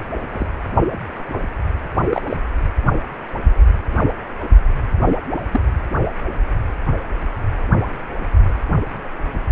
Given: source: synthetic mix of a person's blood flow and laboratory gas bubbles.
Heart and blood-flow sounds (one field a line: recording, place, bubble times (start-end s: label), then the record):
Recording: Doppler ultrasound of blood flow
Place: precordium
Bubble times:
0.33-0.46 s: bubbles
2.09-2.22 s: bubbles
2.28-2.37 s: bubbles
5.06-5.15 s: bubbles
5.51-5.61 s: bubbles
From the record:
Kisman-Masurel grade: 122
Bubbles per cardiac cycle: 1 to 2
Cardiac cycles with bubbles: 10 to 50%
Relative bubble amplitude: moderate (0.250 to 0.450)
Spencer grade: 2 (many but less than half of the cardiac periods contain bubble signals, singularly or in groups)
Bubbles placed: anywhere in the cardiac cycle